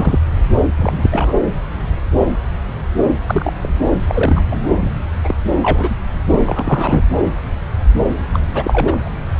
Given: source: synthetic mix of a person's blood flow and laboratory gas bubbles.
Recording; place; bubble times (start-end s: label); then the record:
Doppler ultrasound of blood flow; subclavian vein
0.00-0.19 s: bubbles
0.77-1.35 s: bubbles
3.26-3.53 s: bubbles
3.61-3.70 s: bubbles
4.07-4.91 s: bubbles
5.24-5.34 s: bubbles
5.62-5.95 s: bubbles
6.30-6.39 s: bubbles
6.43-7.02 s: bubbles
8.33-8.40 s: bubbles
8.54-9.09 s: bubbles
From the record:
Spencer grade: 2 (many but less than half of the cardiac periods contain bubble signals, singularly or in groups); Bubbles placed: anywhere in the cardiac cycle